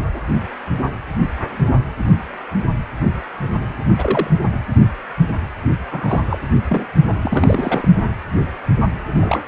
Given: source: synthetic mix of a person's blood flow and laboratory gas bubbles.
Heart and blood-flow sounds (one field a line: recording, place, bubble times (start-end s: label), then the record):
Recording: Doppler ultrasound of blood flow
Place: precordium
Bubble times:
3.98-4.28 s: bubbles
5.91-6.39 s: bubbles
6.69-6.87 s: bubbles
7.22-7.89 s: bubbles
9.17-9.39 s: bubbles
From the record:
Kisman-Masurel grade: 222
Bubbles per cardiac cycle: several, 3 to 8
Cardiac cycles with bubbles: 10 to 50%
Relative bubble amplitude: moderate (0.250 to 0.450)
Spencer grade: 2 (many but less than half of the cardiac periods contain bubble signals, singularly or in groups)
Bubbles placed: only in the low amplitude regions of the cardiac cycle